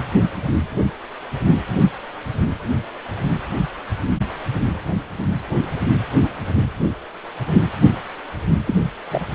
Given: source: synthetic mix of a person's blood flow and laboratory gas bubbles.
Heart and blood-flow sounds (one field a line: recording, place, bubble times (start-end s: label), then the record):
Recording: Doppler ultrasound of blood flow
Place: precordium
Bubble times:
8.66-8.75 s: bubbles
9.11-9.22 s: bubbles
From the record:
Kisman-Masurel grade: 112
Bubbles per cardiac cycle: 1 to 2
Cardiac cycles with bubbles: 1 to 10%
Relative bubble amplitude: moderate (0.250 to 0.450)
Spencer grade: 1 (occasional bubble signal discernible with the cardiac motion signal, with majority of cardiac periods free of bubbles)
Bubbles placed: anywhere in the cardiac cycle